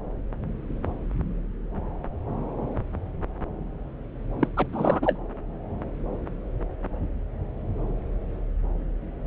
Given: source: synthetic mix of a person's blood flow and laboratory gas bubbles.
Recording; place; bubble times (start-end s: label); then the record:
Doppler ultrasound of blood flow; subclavian vein
4.40-4.48 s: bubbles
4.57-4.67 s: bubbles
4.73-5.19 s: bubbles
From the record:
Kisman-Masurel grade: 212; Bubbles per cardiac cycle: several, 3 to 8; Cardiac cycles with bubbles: 1 to 10%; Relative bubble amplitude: moderate (0.250 to 0.450); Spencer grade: 1 (occasional bubble signal discernible with the cardiac motion signal, with majority of cardiac periods free of bubbles); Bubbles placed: anywhere in the cardiac cycle